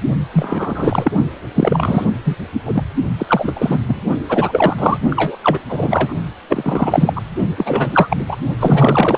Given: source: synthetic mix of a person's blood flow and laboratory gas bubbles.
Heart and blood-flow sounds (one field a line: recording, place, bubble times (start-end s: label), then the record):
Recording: Doppler ultrasound of blood flow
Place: precordium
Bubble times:
0.33-1.11 s: bubbles
1.55-2.05 s: bubbles
2.25-2.36 s: bubbles
2.65-2.83 s: bubbles
3.18-3.79 s: bubbles
3.88-4.00 s: bubbles
4.29-4.75 s: bubbles
4.78-4.97 s: bubbles
5.09-5.37 s: bubbles
5.43-5.59 s: bubbles
5.68-6.14 s: bubbles
6.49-7.13 s: bubbles
7.15-7.21 s: bubbles
7.56-8.26 s: bubbles
8.29-8.36 s: bubbles
8.59-9.17 s: bubbles
From the record:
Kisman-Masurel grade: 343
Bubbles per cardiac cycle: rolling drumbeat, 9 or more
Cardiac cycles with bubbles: 100%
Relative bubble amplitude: loud (0.450 to 0.775)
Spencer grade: 3 (all of the cardiac periods contain showers or single bubble signals, but not dominating or overriding the cardiac motion signals)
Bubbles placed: only in the low amplitude regions of the cardiac cycle